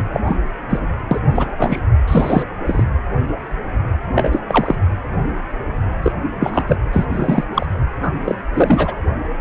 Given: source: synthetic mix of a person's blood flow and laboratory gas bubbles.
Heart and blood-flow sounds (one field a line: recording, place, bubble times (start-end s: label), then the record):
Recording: Doppler ultrasound of blood flow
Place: precordium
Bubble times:
0.00-0.04 s: bubbles
0.13-0.21 s: bubbles
0.24-0.38 s: bubbles
0.70-0.79 s: bubbles
1.11-1.20 s: bubbles
1.34-1.51 s: bubbles
1.57-1.80 s: bubbles
2.08-2.43 s: bubbles
2.66-2.83 s: bubbles
4.15-4.41 s: bubbles
4.48-4.75 s: bubbles
6.02-6.12 s: bubbles
6.40-6.63 s: bubbles
6.67-6.77 s: bubbles
6.92-7.07 s: bubbles
7.10-7.45 s: bubbles
7.54-7.67 s: bubbles
8.01-8.12 s: bubbles
8.24-8.35 s: bubbles
8.54-8.95 s: bubbles
From the record:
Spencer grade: 3 (all of the cardiac periods contain showers or single bubble signals, but not dominating or overriding the cardiac motion signals)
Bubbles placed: anywhere in the cardiac cycle